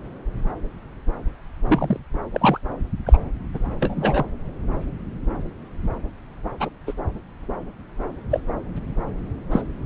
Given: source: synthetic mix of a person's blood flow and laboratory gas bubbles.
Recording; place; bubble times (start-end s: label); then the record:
Doppler ultrasound of blood flow; subclavian vein
1.67-2.00 s: bubbles
2.33-2.59 s: bubbles
3.06-3.18 s: bubbles
3.54-3.59 s: bubbles
3.81-4.25 s: bubbles
6.60-6.70 s: bubbles
6.87-6.93 s: bubbles
8.30-8.40 s: bubbles
9.51-9.62 s: bubbles
From the record:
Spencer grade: 2 (many but less than half of the cardiac periods contain bubble signals, singularly or in groups); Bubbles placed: anywhere in the cardiac cycle